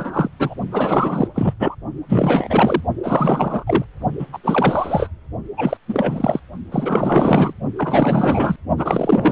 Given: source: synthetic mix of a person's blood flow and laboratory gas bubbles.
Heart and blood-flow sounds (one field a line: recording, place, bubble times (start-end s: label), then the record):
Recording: Doppler ultrasound of blood flow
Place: precordium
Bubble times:
0.00-0.28 s: bubbles
0.39-0.54 s: bubbles
0.71-1.27 s: bubbles
1.34-1.54 s: bubbles
1.59-1.75 s: bubbles
2.08-2.82 s: bubbles
3.03-3.64 s: bubbles
3.67-3.84 s: bubbles
4.19-4.27 s: bubbles
4.33-4.38 s: bubbles
4.44-5.09 s: bubbles
5.57-5.77 s: bubbles
5.88-6.40 s: bubbles
6.71-7.54 s: bubbles
7.77-8.56 s: bubbles
8.76-9.32 s: bubbles
From the record:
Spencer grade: 4 (maximum detectable bubble signal sounding continuously throughout systole and diastole of every cardiac period, and overriding the amplitude of the normal cardiac signals)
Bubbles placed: only in the low amplitude regions of the cardiac cycle